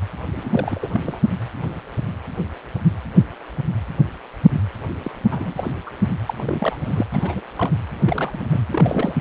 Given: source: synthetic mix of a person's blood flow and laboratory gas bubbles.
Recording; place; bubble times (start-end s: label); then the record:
Doppler ultrasound of blood flow; precordium
0.36-0.41 s: bubbles
0.44-1.00 s: bubbles
1.05-1.21 s: bubbles
5.04-5.11 s: bubbles
5.31-5.53 s: bubbles
5.56-5.72 s: bubbles
5.87-5.90 s: bubbles
6.25-6.34 s: bubbles
6.37-7.04 s: bubbles
7.11-7.42 s: bubbles
7.56-7.71 s: bubbles
8.04-8.47 s: bubbles
8.51-8.62 s: bubbles
8.73-9.16 s: bubbles
From the record:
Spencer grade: 2 (many but less than half of the cardiac periods contain bubble signals, singularly or in groups); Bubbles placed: anywhere in the cardiac cycle